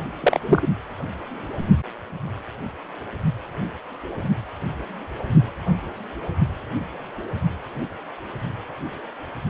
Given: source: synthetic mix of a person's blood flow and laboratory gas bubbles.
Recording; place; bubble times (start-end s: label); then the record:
Doppler ultrasound of blood flow; precordium
0.21-0.39 s: bubbles
0.47-0.67 s: bubbles
From the record:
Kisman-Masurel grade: 113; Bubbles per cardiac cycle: 1 to 2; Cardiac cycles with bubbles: 1 to 10%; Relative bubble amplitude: loud (0.450 to 0.775); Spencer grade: 1 (occasional bubble signal discernible with the cardiac motion signal, with majority of cardiac periods free of bubbles); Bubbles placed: anywhere in the cardiac cycle